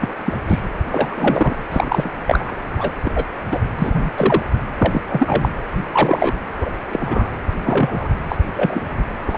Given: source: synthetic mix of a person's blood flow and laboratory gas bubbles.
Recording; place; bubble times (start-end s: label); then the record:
Doppler ultrasound of blood flow; precordium
0.01-0.13 s: bubbles
0.25-0.38 s: bubbles
0.45-0.59 s: bubbles
0.92-1.56 s: bubbles
1.71-2.10 s: bubbles
2.27-2.54 s: bubbles
2.77-2.92 s: bubbles
3.04-3.25 s: bubbles
3.51-3.60 s: bubbles
3.77-4.12 s: bubbles
4.16-4.43 s: bubbles
4.79-5.02 s: bubbles
5.08-5.49 s: bubbles
5.73-5.82 s: bubbles
5.92-6.36 s: bubbles
6.58-6.70 s: bubbles
6.91-7.30 s: bubbles
7.64-8.09 s: bubbles
8.29-8.38 s: bubbles
8.53-8.82 s: bubbles
9.26-9.38 s: bubbles
From the record:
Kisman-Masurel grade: 243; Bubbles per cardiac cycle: several, 3 to 8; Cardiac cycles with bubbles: 100%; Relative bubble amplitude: loud (0.450 to 0.775); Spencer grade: 3 (all of the cardiac periods contain showers or single bubble signals, but not dominating or overriding the cardiac motion signals); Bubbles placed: anywhere in the cardiac cycle